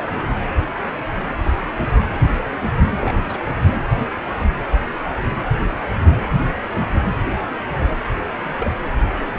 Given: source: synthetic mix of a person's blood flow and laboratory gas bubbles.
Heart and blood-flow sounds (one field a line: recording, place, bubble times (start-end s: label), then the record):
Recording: Doppler ultrasound of blood flow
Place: precordium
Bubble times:
3.00-3.17 s: bubbles
3.29-3.38 s: bubbles
8.58-8.71 s: bubbles
From the record:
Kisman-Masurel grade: 121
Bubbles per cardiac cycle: 1 to 2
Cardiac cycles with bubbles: 10 to 50%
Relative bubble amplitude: barely perceptible (0.100 to 0.250)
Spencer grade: 2 (many but less than half of the cardiac periods contain bubble signals, singularly or in groups)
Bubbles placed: anywhere in the cardiac cycle